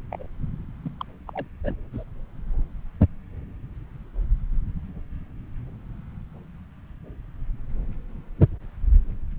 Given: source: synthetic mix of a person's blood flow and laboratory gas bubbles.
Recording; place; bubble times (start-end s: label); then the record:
Doppler ultrasound of blood flow; subclavian vein
0.10-0.26 s: bubbles
0.85-0.91 s: bubbles
1.00-1.04 s: bubbles
1.27-1.47 s: bubbles
1.64-1.76 s: bubbles
1.93-2.03 s: bubbles
From the record:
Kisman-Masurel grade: 221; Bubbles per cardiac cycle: several, 3 to 8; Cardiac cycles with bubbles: 10 to 50%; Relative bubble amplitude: barely perceptible (0.100 to 0.250); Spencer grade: 2 (many but less than half of the cardiac periods contain bubble signals, singularly or in groups); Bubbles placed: anywhere in the cardiac cycle